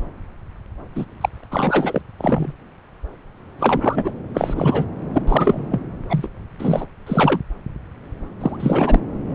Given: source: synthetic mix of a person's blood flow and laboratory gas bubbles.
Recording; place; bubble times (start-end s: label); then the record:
Doppler ultrasound of blood flow; subclavian vein
0.95-1.05 s: bubbles
1.21-1.29 s: bubbles
1.50-2.02 s: bubbles
2.18-2.52 s: bubbles
3.58-4.10 s: bubbles
4.34-4.84 s: bubbles
5.13-5.23 s: bubbles
5.27-5.80 s: bubbles
6.09-6.27 s: bubbles
6.58-6.86 s: bubbles
7.06-7.40 s: bubbles
8.40-8.56 s: bubbles
8.59-9.00 s: bubbles
From the record:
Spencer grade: 3 (all of the cardiac periods contain showers or single bubble signals, but not dominating or overriding the cardiac motion signals); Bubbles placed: anywhere in the cardiac cycle